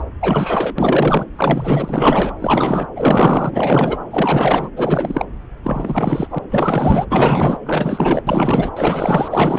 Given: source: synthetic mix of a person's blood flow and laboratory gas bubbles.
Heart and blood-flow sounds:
Doppler ultrasound of blood flow; subclavian vein
0.20-0.73 s: bubbles
0.78-1.26 s: bubbles
1.37-2.33 s: bubbles
2.38-2.88 s: bubbles
2.96-3.97 s: bubbles
4.11-4.69 s: bubbles
4.76-5.25 s: bubbles
5.64-6.27 s: bubbles
6.30-6.39 s: bubbles
6.50-7.06 s: bubbles
7.11-7.58 s: bubbles
7.66-8.23 s: bubbles
8.27-8.71 s: bubbles
8.76-9.59 s: bubbles
From the record:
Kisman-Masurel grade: 444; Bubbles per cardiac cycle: continuous sound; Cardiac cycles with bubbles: 100%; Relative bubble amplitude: maximal (0.775 to 0.999); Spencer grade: 4 (maximum detectable bubble signal sounding continuously throughout systole and diastole of every cardiac period, and overriding the amplitude of the normal cardiac signals); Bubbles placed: anywhere in the cardiac cycle

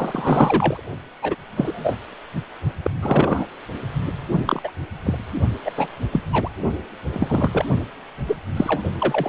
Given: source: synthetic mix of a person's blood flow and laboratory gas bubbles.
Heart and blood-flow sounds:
Doppler ultrasound of blood flow; precordium
0.00-0.84 s: bubbles
1.21-1.35 s: bubbles
1.56-1.96 s: bubbles
2.83-2.90 s: bubbles
3.02-3.46 s: bubbles
4.46-4.72 s: bubbles
5.05-5.18 s: bubbles
5.65-5.71 s: bubbles
5.77-5.87 s: bubbles
6.12-6.21 s: bubbles
6.31-6.49 s: bubbles
7.12-7.65 s: bubbles
8.27-8.36 s: bubbles
8.56-8.83 s: bubbles
8.98-9.29 s: bubbles
From the record:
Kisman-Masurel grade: 233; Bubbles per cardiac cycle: several, 3 to 8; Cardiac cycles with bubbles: 50 to 99%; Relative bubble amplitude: loud (0.450 to 0.775); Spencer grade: 3 (all of the cardiac periods contain showers or single bubble signals, but not dominating or overriding the cardiac motion signals); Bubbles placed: only in the low amplitude regions of the cardiac cycle

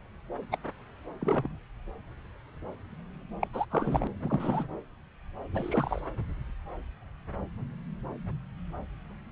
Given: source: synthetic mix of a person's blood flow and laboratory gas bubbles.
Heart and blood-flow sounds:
Doppler ultrasound of blood flow; subclavian vein
0.52-0.57 s: bubbles
1.21-1.48 s: bubbles
3.40-3.48 s: bubbles
3.53-3.65 s: bubbles
3.70-4.08 s: bubbles
4.21-4.68 s: bubbles
5.54-6.00 s: bubbles
From the record:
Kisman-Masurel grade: 222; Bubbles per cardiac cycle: several, 3 to 8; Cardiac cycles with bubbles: 10 to 50%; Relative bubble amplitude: moderate (0.250 to 0.450); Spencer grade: 2 (many but less than half of the cardiac periods contain bubble signals, singularly or in groups); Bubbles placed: anywhere in the cardiac cycle

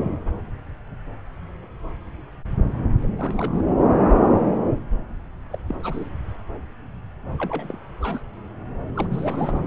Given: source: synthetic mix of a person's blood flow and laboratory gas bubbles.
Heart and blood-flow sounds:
Doppler ultrasound of blood flow; subclavian vein
3.02-3.07 s: bubbles
3.17-3.62 s: bubbles
5.51-5.58 s: bubbles
5.67-5.75 s: bubbles
5.83-6.09 s: bubbles
7.38-7.78 s: bubbles
8.01-8.23 s: bubbles
8.94-9.61 s: bubbles
From the record:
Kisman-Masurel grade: 221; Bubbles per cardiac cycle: several, 3 to 8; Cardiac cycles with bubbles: 10 to 50%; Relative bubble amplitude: barely perceptible (0.100 to 0.250); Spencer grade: 2 (many but less than half of the cardiac periods contain bubble signals, singularly or in groups); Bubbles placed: anywhere in the cardiac cycle

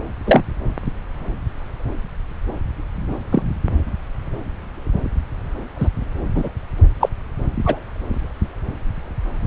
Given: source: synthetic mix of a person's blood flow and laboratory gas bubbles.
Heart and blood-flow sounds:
Doppler ultrasound of blood flow; subclavian vein
0.26-0.43 s: bubbles
3.32-3.43 s: bubbles
5.79-5.88 s: bubbles
6.35-6.48 s: bubbles
7.00-7.09 s: bubbles
7.65-7.80 s: bubbles
From the record:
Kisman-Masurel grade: 123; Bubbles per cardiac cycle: 1 to 2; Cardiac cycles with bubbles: 10 to 50%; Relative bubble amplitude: loud (0.450 to 0.775); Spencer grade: 2 (many but less than half of the cardiac periods contain bubble signals, singularly or in groups); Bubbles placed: anywhere in the cardiac cycle

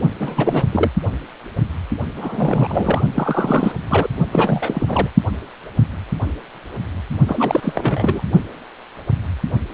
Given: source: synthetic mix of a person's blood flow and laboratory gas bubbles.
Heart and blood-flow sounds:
Doppler ultrasound of blood flow; precordium
0.19-0.64 s: bubbles
0.71-0.90 s: bubbles
2.16-3.02 s: bubbles
3.14-3.72 s: bubbles
3.90-4.08 s: bubbles
4.32-5.09 s: bubbles
7.26-8.21 s: bubbles
From the record:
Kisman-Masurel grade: 332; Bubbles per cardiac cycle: rolling drumbeat, 9 or more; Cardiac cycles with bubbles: 50 to 99%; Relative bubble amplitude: moderate (0.250 to 0.450); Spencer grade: 3 (all of the cardiac periods contain showers or single bubble signals, but not dominating or overriding the cardiac motion signals); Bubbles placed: only in the low amplitude regions of the cardiac cycle

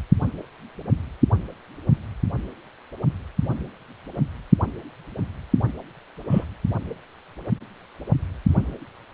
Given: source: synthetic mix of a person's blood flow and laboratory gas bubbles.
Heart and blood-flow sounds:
Doppler ultrasound of blood flow; precordium
6.31-6.45 s: bubbles
From the record:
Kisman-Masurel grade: 112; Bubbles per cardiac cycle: 1 to 2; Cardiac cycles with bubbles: 1 to 10%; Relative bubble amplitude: moderate (0.250 to 0.450); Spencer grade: 1 (occasional bubble signal discernible with the cardiac motion signal, with majority of cardiac periods free of bubbles); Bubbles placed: anywhere in the cardiac cycle

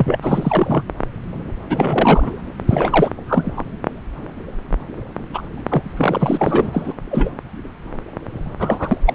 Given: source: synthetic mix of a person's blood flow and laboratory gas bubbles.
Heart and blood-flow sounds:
Doppler ultrasound of blood flow; subclavian vein
0.00-0.16 s: bubbles
0.22-0.83 s: bubbles
1.70-2.31 s: bubbles
2.68-3.11 s: bubbles
3.27-3.65 s: bubbles
5.33-5.42 s: bubbles
5.68-5.92 s: bubbles
5.96-6.93 s: bubbles
7.10-7.30 s: bubbles
8.59-8.97 s: bubbles
9.05-9.14 s: bubbles
From the record:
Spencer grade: 3 (all of the cardiac periods contain showers or single bubble signals, but not dominating or overriding the cardiac motion signals); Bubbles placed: anywhere in the cardiac cycle

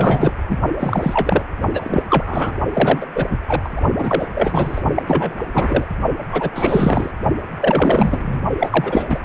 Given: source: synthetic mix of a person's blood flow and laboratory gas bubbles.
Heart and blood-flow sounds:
Doppler ultrasound of blood flow; precordium
0.00-0.33 s: bubbles
0.48-0.58 s: bubbles
0.79-1.43 s: bubbles
1.74-2.03 s: bubbles
2.09-2.58 s: bubbles
2.73-3.06 s: bubbles
3.15-3.26 s: bubbles
3.30-3.37 s: bubbles
3.47-3.81 s: bubbles
3.97-4.27 s: bubbles
4.34-4.81 s: bubbles
4.95-5.03 s: bubbles
5.07-5.35 s: bubbles
5.53-5.86 s: bubbles
6.32-6.50 s: bubbles
6.54-7.11 s: bubbles
7.61-8.40 s: bubbles
8.60-9.07 s: bubbles
9.09-9.19 s: bubbles
From the record:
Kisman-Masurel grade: 343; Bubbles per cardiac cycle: rolling drumbeat, 9 or more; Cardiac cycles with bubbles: 100%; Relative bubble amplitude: loud (0.450 to 0.775); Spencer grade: 3 (all of the cardiac periods contain showers or single bubble signals, but not dominating or overriding the cardiac motion signals); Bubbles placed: only in the low amplitude regions of the cardiac cycle

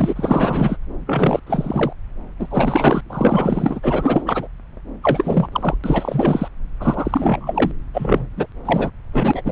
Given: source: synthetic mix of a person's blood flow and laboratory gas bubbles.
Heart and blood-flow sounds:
Doppler ultrasound of blood flow; subclavian vein
0.00-0.76 s: bubbles
1.06-1.40 s: bubbles
1.46-1.93 s: bubbles
2.40-3.01 s: bubbles
3.09-3.80 s: bubbles
3.83-4.47 s: bubbles
5.03-5.47 s: bubbles
5.52-5.77 s: bubbles
5.83-6.48 s: bubbles
6.80-7.72 s: bubbles
7.93-8.27 s: bubbles
8.37-8.46 s: bubbles
8.64-8.90 s: bubbles
9.13-9.41 s: bubbles
9.45-9.51 s: bubbles
From the record:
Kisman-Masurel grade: 342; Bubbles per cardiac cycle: rolling drumbeat, 9 or more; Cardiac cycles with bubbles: 100%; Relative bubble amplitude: moderate (0.250 to 0.450); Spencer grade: 3 (all of the cardiac periods contain showers or single bubble signals, but not dominating or overriding the cardiac motion signals); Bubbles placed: anywhere in the cardiac cycle

